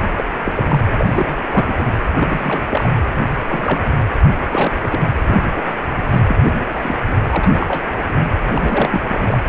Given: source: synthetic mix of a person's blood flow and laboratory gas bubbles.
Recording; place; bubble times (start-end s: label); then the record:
Doppler ultrasound of blood flow; precordium
0.17-0.23 s: bubbles
0.45-0.52 s: bubbles
0.56-0.79 s: bubbles
0.97-1.37 s: bubbles
1.50-1.93 s: bubbles
2.16-2.64 s: bubbles
2.70-2.90 s: bubbles
3.48-3.92 s: bubbles
4.51-4.71 s: bubbles
4.81-4.99 s: bubbles
5.26-5.73 s: bubbles
6.10-6.20 s: bubbles
6.28-6.36 s: bubbles
6.43-6.50 s: bubbles
6.75-6.95 s: bubbles
7.05-7.15 s: bubbles
7.29-7.49 s: bubbles
7.52-7.84 s: bubbles
8.53-9.01 s: bubbles
9.09-9.38 s: bubbles
From the record:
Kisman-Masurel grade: 242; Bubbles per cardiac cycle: several, 3 to 8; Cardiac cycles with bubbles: 100%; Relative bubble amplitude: moderate (0.250 to 0.450); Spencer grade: 3 (all of the cardiac periods contain showers or single bubble signals, but not dominating or overriding the cardiac motion signals); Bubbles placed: anywhere in the cardiac cycle